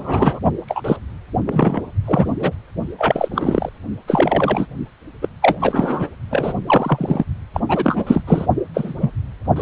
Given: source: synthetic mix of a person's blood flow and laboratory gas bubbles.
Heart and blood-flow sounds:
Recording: Doppler ultrasound of blood flow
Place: precordium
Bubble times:
0.00-0.39 s: bubbles
0.68-0.96 s: bubbles
1.46-1.80 s: bubbles
2.04-2.34 s: bubbles
2.40-2.52 s: bubbles
2.98-3.29 s: bubbles
3.31-3.69 s: bubbles
4.07-4.67 s: bubbles
5.21-5.29 s: bubbles
5.42-5.57 s: bubbles
5.59-6.08 s: bubbles
6.30-6.54 s: bubbles
6.67-7.25 s: bubbles
7.54-7.60 s: bubbles
7.68-8.04 s: bubbles
8.06-8.22 s: bubbles
8.27-8.46 s: bubbles
8.74-8.94 s: bubbles
9.01-9.13 s: bubbles
9.56-9.62 s: bubbles
From the record:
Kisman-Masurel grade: 243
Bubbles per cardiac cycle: several, 3 to 8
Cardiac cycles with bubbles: 100%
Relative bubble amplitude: loud (0.450 to 0.775)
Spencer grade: 3 (all of the cardiac periods contain showers or single bubble signals, but not dominating or overriding the cardiac motion signals)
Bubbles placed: only in the low amplitude regions of the cardiac cycle

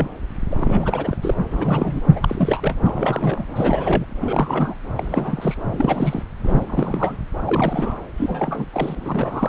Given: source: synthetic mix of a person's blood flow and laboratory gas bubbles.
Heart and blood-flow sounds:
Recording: Doppler ultrasound of blood flow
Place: subclavian vein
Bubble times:
0.00-0.08 s: bubbles
0.51-1.16 s: bubbles
1.22-1.34 s: bubbles
1.51-2.01 s: bubbles
2.11-2.75 s: bubbles
2.83-3.45 s: bubbles
3.55-4.06 s: bubbles
4.21-4.75 s: bubbles
4.97-5.57 s: bubbles
5.71-6.23 s: bubbles
6.44-7.17 s: bubbles
7.45-8.01 s: bubbles
8.17-8.66 s: bubbles
8.72-9.48 s: bubbles
From the record:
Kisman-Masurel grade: 342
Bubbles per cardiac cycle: rolling drumbeat, 9 or more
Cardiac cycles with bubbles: 100%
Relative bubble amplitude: moderate (0.250 to 0.450)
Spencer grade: 3 (all of the cardiac periods contain showers or single bubble signals, but not dominating or overriding the cardiac motion signals)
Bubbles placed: anywhere in the cardiac cycle

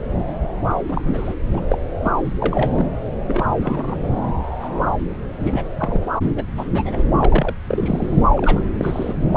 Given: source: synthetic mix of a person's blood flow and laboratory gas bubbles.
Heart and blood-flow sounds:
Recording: Doppler ultrasound of blood flow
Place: subclavian vein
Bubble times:
0.69-0.76 s: bubbles
0.88-1.34 s: bubbles
1.53-1.60 s: bubbles
1.68-1.78 s: bubbles
2.04-2.11 s: bubbles
2.24-2.34 s: bubbles
2.40-2.86 s: bubbles
3.25-3.52 s: bubbles
3.59-4.03 s: bubbles
4.61-4.70 s: bubbles
5.32-5.67 s: bubbles
5.79-5.97 s: bubbles
6.35-6.44 s: bubbles
6.57-6.64 s: bubbles
6.72-7.03 s: bubbles
7.19-7.55 s: bubbles
7.68-8.17 s: bubbles
8.37-8.62 s: bubbles
8.78-9.13 s: bubbles
From the record:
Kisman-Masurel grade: 242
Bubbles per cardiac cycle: several, 3 to 8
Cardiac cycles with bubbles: 100%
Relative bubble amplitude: moderate (0.250 to 0.450)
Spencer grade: 3 (all of the cardiac periods contain showers or single bubble signals, but not dominating or overriding the cardiac motion signals)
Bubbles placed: anywhere in the cardiac cycle

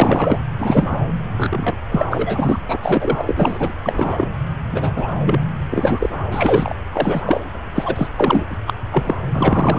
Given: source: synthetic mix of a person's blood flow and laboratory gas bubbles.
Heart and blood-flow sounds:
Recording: Doppler ultrasound of blood flow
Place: subclavian vein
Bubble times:
0.00-0.39 s: bubbles
0.59-0.99 s: bubbles
1.37-1.77 s: bubbles
1.91-2.04 s: bubbles
2.10-2.60 s: bubbles
2.68-2.77 s: bubbles
2.83-3.73 s: bubbles
3.82-4.28 s: bubbles
4.72-4.92 s: bubbles
4.95-5.11 s: bubbles
5.25-5.39 s: bubbles
5.70-6.09 s: bubbles
6.31-6.74 s: bubbles
6.92-7.20 s: bubbles
7.25-7.42 s: bubbles
7.74-8.08 s: bubbles
8.16-8.43 s: bubbles
8.50-8.58 s: bubbles
8.67-8.74 s: bubbles
8.91-9.16 s: bubbles
9.33-9.79 s: bubbles
From the record:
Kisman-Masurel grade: 233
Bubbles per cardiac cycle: several, 3 to 8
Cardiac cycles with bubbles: 50 to 99%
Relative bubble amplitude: loud (0.450 to 0.775)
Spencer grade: 3 (all of the cardiac periods contain showers or single bubble signals, but not dominating or overriding the cardiac motion signals)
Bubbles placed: anywhere in the cardiac cycle

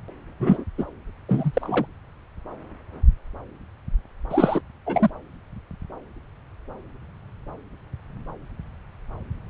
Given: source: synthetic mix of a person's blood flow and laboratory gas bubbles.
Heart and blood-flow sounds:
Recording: Doppler ultrasound of blood flow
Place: subclavian vein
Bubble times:
0.40-0.64 s: bubbles
0.78-0.85 s: bubbles
1.28-1.85 s: bubbles
4.30-4.61 s: bubbles
4.86-5.10 s: bubbles
From the record:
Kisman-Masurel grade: 223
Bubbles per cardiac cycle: several, 3 to 8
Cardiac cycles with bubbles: 10 to 50%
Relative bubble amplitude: loud (0.450 to 0.775)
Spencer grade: 2 (many but less than half of the cardiac periods contain bubble signals, singularly or in groups)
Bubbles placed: anywhere in the cardiac cycle

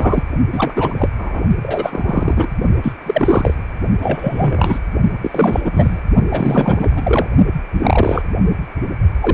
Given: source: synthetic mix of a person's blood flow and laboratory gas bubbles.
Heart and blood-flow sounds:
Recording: Doppler ultrasound of blood flow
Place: precordium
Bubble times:
0.00-0.24 s: bubbles
0.52-0.73 s: bubbles
0.76-1.09 s: bubbles
1.18-1.42 s: bubbles
1.61-2.48 s: bubbles
2.82-2.92 s: bubbles
3.06-3.56 s: bubbles
4.00-4.79 s: bubbles
5.21-5.62 s: bubbles
5.64-6.01 s: bubbles
6.30-7.27 s: bubbles
7.73-8.22 s: bubbles
9.21-9.34 s: bubbles
From the record:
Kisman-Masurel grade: 343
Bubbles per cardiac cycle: rolling drumbeat, 9 or more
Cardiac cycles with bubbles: 100%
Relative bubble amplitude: loud (0.450 to 0.775)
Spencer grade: 3 (all of the cardiac periods contain showers or single bubble signals, but not dominating or overriding the cardiac motion signals)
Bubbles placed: only in the low amplitude regions of the cardiac cycle

